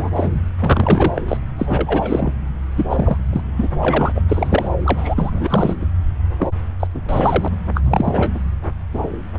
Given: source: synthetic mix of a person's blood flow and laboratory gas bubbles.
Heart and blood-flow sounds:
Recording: Doppler ultrasound of blood flow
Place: subclavian vein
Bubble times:
0.00-0.34 s: bubbles
0.59-1.22 s: bubbles
1.28-1.37 s: bubbles
1.58-2.32 s: bubbles
2.75-2.86 s: bubbles
2.90-3.18 s: bubbles
3.32-3.42 s: bubbles
3.56-3.68 s: bubbles
3.81-4.22 s: bubbles
4.28-4.70 s: bubbles
4.84-5.15 s: bubbles
5.17-5.88 s: bubbles
6.38-6.48 s: bubbles
6.79-6.87 s: bubbles
6.94-7.01 s: bubbles
7.08-7.48 s: bubbles
7.74-7.82 s: bubbles
7.84-8.31 s: bubbles
8.34-8.40 s: bubbles
8.93-9.08 s: bubbles
From the record:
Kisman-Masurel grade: 343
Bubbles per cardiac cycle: rolling drumbeat, 9 or more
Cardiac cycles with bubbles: 100%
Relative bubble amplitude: loud (0.450 to 0.775)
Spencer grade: 3 (all of the cardiac periods contain showers or single bubble signals, but not dominating or overriding the cardiac motion signals)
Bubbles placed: anywhere in the cardiac cycle

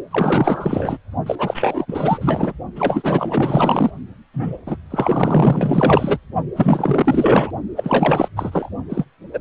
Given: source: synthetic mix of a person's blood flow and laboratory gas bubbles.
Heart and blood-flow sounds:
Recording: Doppler ultrasound of blood flow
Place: precordium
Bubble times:
0.10-0.98 s: bubbles
1.26-1.35 s: bubbles
1.38-2.52 s: bubbles
2.75-3.91 s: bubbles
4.33-4.58 s: bubbles
4.66-4.77 s: bubbles
4.90-6.18 s: bubbles
6.56-7.51 s: bubbles
7.76-8.28 s: bubbles
8.36-8.69 s: bubbles
8.89-9.05 s: bubbles
9.33-9.41 s: bubbles
From the record:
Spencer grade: 4 (maximum detectable bubble signal sounding continuously throughout systole and diastole of every cardiac period, and overriding the amplitude of the normal cardiac signals)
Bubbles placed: only in the low amplitude regions of the cardiac cycle

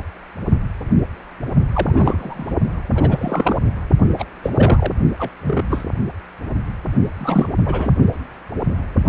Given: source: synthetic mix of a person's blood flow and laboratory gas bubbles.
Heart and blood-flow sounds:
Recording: Doppler ultrasound of blood flow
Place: precordium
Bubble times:
1.73-2.52 s: bubbles
2.94-3.55 s: bubbles
4.18-4.25 s: bubbles
4.42-4.51 s: bubbles
4.55-4.92 s: bubbles
5.18-5.30 s: bubbles
5.45-5.63 s: bubbles
5.70-5.84 s: bubbles
7.17-7.49 s: bubbles
7.65-7.93 s: bubbles
From the record:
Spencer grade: 3 (all of the cardiac periods contain showers or single bubble signals, but not dominating or overriding the cardiac motion signals)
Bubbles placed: only in the low amplitude regions of the cardiac cycle

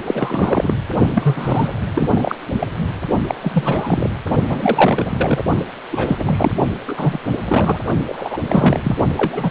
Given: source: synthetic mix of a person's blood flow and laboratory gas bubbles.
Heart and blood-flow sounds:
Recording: Doppler ultrasound of blood flow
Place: precordium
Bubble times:
0.04-0.74 s: bubbles
1.14-1.73 s: bubbles
1.95-2.35 s: bubbles
2.59-2.67 s: bubbles
3.26-3.35 s: bubbles
3.42-4.10 s: bubbles
4.49-5.43 s: bubbles
5.59-5.64 s: bubbles
5.92-6.52 s: bubbles
6.87-7.19 s: bubbles
7.45-7.79 s: bubbles
8.06-8.37 s: bubbles
8.48-8.96 s: bubbles
9.16-9.50 s: bubbles
From the record:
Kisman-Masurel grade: 343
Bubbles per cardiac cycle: rolling drumbeat, 9 or more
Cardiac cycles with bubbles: 100%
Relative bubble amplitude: loud (0.450 to 0.775)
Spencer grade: 3 (all of the cardiac periods contain showers or single bubble signals, but not dominating or overriding the cardiac motion signals)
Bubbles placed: only in the low amplitude regions of the cardiac cycle

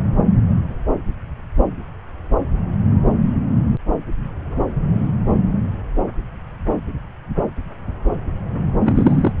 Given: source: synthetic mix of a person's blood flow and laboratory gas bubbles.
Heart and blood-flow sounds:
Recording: Doppler ultrasound of blood flow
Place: subclavian vein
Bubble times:
8.86-9.32 s: bubbles
From the record:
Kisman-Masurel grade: 212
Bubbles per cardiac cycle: several, 3 to 8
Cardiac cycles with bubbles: 1 to 10%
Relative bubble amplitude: moderate (0.250 to 0.450)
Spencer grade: 1 (occasional bubble signal discernible with the cardiac motion signal, with majority of cardiac periods free of bubbles)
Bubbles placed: anywhere in the cardiac cycle

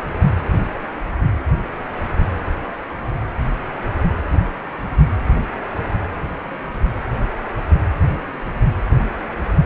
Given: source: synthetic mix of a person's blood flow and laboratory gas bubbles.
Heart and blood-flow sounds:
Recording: Doppler ultrasound of blood flow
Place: precordium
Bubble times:
no bubbles
From the record:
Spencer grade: 0 (complete lack of bubble signals)

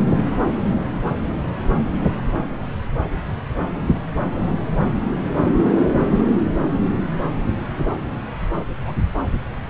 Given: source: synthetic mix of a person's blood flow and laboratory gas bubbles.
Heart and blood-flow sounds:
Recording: Doppler ultrasound of blood flow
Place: subclavian vein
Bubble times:
8.86-8.94 s: bubbles
From the record:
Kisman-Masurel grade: 121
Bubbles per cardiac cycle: 1 to 2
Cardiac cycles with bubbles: 10 to 50%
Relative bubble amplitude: barely perceptible (0.100 to 0.250)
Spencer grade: 2 (many but less than half of the cardiac periods contain bubble signals, singularly or in groups)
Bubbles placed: anywhere in the cardiac cycle

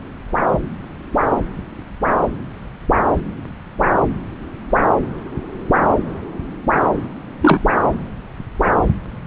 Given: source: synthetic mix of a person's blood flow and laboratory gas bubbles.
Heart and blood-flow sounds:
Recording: Doppler ultrasound of blood flow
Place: subclavian vein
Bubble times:
7.42-7.60 s: bubbles
From the record:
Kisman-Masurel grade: 113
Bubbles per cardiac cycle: 1 to 2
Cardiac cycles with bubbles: 1 to 10%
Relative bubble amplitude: loud (0.450 to 0.775)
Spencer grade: 1 (occasional bubble signal discernible with the cardiac motion signal, with majority of cardiac periods free of bubbles)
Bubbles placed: anywhere in the cardiac cycle

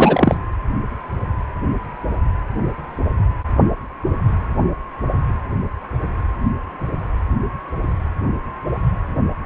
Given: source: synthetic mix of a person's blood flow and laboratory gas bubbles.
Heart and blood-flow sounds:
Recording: Doppler ultrasound of blood flow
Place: precordium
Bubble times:
0.00-0.36 s: bubbles
From the record:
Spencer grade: 1 (occasional bubble signal discernible with the cardiac motion signal, with majority of cardiac periods free of bubbles)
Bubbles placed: anywhere in the cardiac cycle

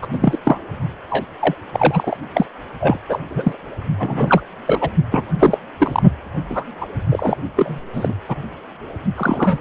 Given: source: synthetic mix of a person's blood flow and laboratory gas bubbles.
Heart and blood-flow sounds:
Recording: Doppler ultrasound of blood flow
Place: precordium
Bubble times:
0.01-0.07 s: bubbles
0.11-0.38 s: bubbles
0.44-0.58 s: bubbles
1.09-1.26 s: bubbles
1.41-1.54 s: bubbles
1.72-2.17 s: bubbles
2.34-2.46 s: bubbles
2.80-2.99 s: bubbles
3.09-3.18 s: bubbles
3.30-3.57 s: bubbles
3.99-4.41 s: bubbles
4.65-4.90 s: bubbles
5.11-5.25 s: bubbles
5.38-5.58 s: bubbles
5.79-6.01 s: bubbles
6.49-6.64 s: bubbles
6.80-6.88 s: bubbles
7.09-7.36 s: bubbles
7.55-7.82 s: bubbles
7.93-8.14 s: bubbles
8.29-8.36 s: bubbles
9.16-9.59 s: bubbles
From the record:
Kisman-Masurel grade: 243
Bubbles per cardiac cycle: several, 3 to 8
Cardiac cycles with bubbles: 100%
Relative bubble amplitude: loud (0.450 to 0.775)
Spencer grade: 3 (all of the cardiac periods contain showers or single bubble signals, but not dominating or overriding the cardiac motion signals)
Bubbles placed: only in the low amplitude regions of the cardiac cycle

